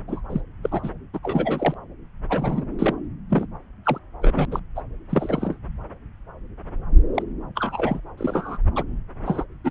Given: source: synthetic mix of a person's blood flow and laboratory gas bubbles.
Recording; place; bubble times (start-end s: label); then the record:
Doppler ultrasound of blood flow; subclavian vein
0.07-0.21 s: bubbles
0.29-0.41 s: bubbles
0.63-0.90 s: bubbles
1.14-1.19 s: bubbles
1.23-1.74 s: bubbles
2.29-2.64 s: bubbles
2.79-2.95 s: bubbles
3.29-3.46 s: bubbles
3.85-3.98 s: bubbles
4.21-4.45 s: bubbles
4.51-4.59 s: bubbles
4.75-4.81 s: bubbles
5.09-5.56 s: bubbles
7.14-7.22 s: bubbles
7.55-8.01 s: bubbles
8.18-8.58 s: bubbles
8.76-8.83 s: bubbles
9.26-9.45 s: bubbles
9.64-9.71 s: bubbles
From the record:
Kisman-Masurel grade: 232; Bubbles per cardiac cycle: several, 3 to 8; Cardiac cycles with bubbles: 50 to 99%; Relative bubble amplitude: moderate (0.250 to 0.450); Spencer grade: 3 (all of the cardiac periods contain showers or single bubble signals, but not dominating or overriding the cardiac motion signals); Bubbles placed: anywhere in the cardiac cycle